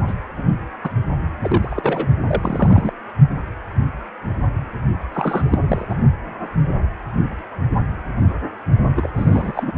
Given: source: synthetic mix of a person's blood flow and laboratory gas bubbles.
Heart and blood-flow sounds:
Doppler ultrasound of blood flow; precordium
0.07-0.14 s: bubbles
0.37-0.43 s: bubbles
0.83-0.89 s: bubbles
1.42-2.07 s: bubbles
2.27-2.93 s: bubbles
5.13-5.87 s: bubbles
5.90-5.95 s: bubbles
8.96-9.09 s: bubbles
9.14-9.71 s: bubbles
From the record:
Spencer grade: 3 (all of the cardiac periods contain showers or single bubble signals, but not dominating or overriding the cardiac motion signals); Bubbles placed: only in the low amplitude regions of the cardiac cycle

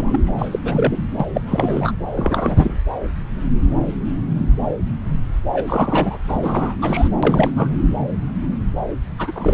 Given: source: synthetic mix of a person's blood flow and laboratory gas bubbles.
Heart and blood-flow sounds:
Doppler ultrasound of blood flow; subclavian vein
0.00-0.20 s: bubbles
0.26-0.33 s: bubbles
0.38-0.48 s: bubbles
0.51-0.59 s: bubbles
0.64-1.00 s: bubbles
1.20-1.27 s: bubbles
1.33-1.41 s: bubbles
1.46-1.92 s: bubbles
2.14-2.81 s: bubbles
5.53-6.18 s: bubbles
6.29-6.75 s: bubbles
6.82-7.08 s: bubbles
7.22-7.50 s: bubbles
7.55-7.78 s: bubbles
9.18-9.32 s: bubbles
9.35-9.53 s: bubbles
From the record:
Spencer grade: 3 (all of the cardiac periods contain showers or single bubble signals, but not dominating or overriding the cardiac motion signals); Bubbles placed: anywhere in the cardiac cycle

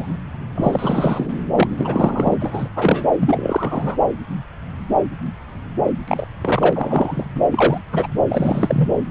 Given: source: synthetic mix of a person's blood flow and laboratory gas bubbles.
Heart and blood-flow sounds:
Doppler ultrasound of blood flow; subclavian vein
0.00-0.18 s: bubbles
0.54-1.34 s: bubbles
1.55-1.68 s: bubbles
1.72-1.74 s: bubbles
1.77-2.36 s: bubbles
2.40-2.69 s: bubbles
2.75-3.05 s: bubbles
3.19-3.98 s: bubbles
6.08-6.27 s: bubbles
6.41-7.25 s: bubbles
7.35-7.41 s: bubbles
7.50-7.78 s: bubbles
7.92-8.06 s: bubbles
8.29-8.88 s: bubbles
From the record:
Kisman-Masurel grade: 233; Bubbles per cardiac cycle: several, 3 to 8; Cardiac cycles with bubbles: 50 to 99%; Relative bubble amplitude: loud (0.450 to 0.775); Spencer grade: 3 (all of the cardiac periods contain showers or single bubble signals, but not dominating or overriding the cardiac motion signals); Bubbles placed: anywhere in the cardiac cycle

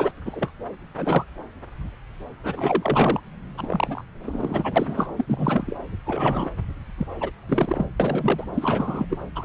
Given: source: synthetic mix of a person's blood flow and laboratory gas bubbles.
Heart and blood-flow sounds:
Doppler ultrasound of blood flow; subclavian vein
0.00-0.11 s: bubbles
0.26-0.50 s: bubbles
0.97-1.24 s: bubbles
2.44-3.20 s: bubbles
3.57-4.04 s: bubbles
4.24-5.10 s: bubbles
5.17-5.76 s: bubbles
6.05-6.49 s: bubbles
6.98-7.06 s: bubbles
7.20-7.31 s: bubbles
7.48-7.86 s: bubbles
8.00-8.46 s: bubbles
8.54-9.07 s: bubbles
9.10-9.18 s: bubbles
9.35-9.45 s: bubbles
From the record:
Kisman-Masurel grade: 332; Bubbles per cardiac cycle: rolling drumbeat, 9 or more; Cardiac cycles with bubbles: 50 to 99%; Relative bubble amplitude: moderate (0.250 to 0.450); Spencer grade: 3 (all of the cardiac periods contain showers or single bubble signals, but not dominating or overriding the cardiac motion signals); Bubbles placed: anywhere in the cardiac cycle

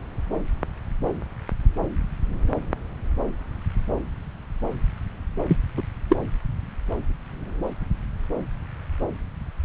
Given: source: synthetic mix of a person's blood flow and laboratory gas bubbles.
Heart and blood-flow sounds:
Doppler ultrasound of blood flow; subclavian vein
5.49-5.57 s: bubbles
5.76-5.83 s: bubbles
6.09-6.16 s: bubbles
From the record:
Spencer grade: 2 (many but less than half of the cardiac periods contain bubble signals, singularly or in groups); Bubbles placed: anywhere in the cardiac cycle

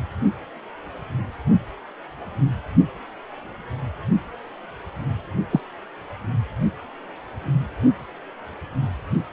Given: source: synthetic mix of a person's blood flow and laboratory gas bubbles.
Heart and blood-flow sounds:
Doppler ultrasound of blood flow; precordium
5.50-5.60 s: bubbles
From the record:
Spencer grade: 1 (occasional bubble signal discernible with the cardiac motion signal, with majority of cardiac periods free of bubbles); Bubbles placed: only in the low amplitude regions of the cardiac cycle

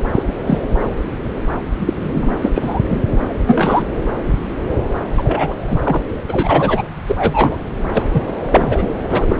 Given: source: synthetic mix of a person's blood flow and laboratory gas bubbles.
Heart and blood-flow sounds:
Doppler ultrasound of blood flow; subclavian vein
0.15-0.22 s: bubbles
0.28-0.33 s: bubbles
0.46-0.59 s: bubbles
1.79-1.94 s: bubbles
1.99-2.31 s: bubbles
2.42-2.51 s: bubbles
2.55-2.80 s: bubbles
2.90-3.00 s: bubbles
3.47-3.86 s: bubbles
5.18-5.55 s: bubbles
5.67-5.78 s: bubbles
5.84-6.02 s: bubbles
6.29-6.83 s: bubbles
7.08-7.56 s: bubbles
7.92-8.03 s: bubbles
8.13-8.23 s: bubbles
8.50-8.91 s: bubbles
9.08-9.26 s: bubbles
9.29-9.37 s: bubbles
From the record:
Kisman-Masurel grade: 233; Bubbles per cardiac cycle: several, 3 to 8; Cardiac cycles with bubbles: 50 to 99%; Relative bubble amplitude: loud (0.450 to 0.775); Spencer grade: 3 (all of the cardiac periods contain showers or single bubble signals, but not dominating or overriding the cardiac motion signals); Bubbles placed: anywhere in the cardiac cycle

